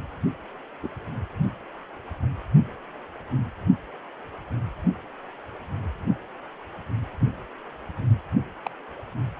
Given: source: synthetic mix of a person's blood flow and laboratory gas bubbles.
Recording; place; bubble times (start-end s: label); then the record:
Doppler ultrasound of blood flow; precordium
0.83-0.88 s: bubbles
8.66-8.70 s: bubbles
From the record:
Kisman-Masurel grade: 121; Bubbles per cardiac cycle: 1 to 2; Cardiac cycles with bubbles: 10 to 50%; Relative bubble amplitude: barely perceptible (0.100 to 0.250); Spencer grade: 2 (many but less than half of the cardiac periods contain bubble signals, singularly or in groups); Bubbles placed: only in the low amplitude regions of the cardiac cycle